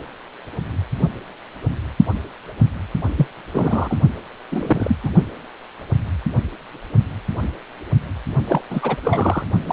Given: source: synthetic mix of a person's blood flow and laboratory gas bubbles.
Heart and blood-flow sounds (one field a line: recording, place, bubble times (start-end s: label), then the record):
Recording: Doppler ultrasound of blood flow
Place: precordium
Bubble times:
3.18-3.27 s: bubbles
3.54-3.97 s: bubbles
4.49-4.96 s: bubbles
5.04-5.11 s: bubbles
8.47-8.61 s: bubbles
8.70-8.96 s: bubbles
9.03-9.47 s: bubbles
9.65-9.73 s: bubbles
From the record:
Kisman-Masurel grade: 222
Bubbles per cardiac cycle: several, 3 to 8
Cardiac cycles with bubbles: 10 to 50%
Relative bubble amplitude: moderate (0.250 to 0.450)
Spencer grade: 2 (many but less than half of the cardiac periods contain bubble signals, singularly or in groups)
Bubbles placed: only in the low amplitude regions of the cardiac cycle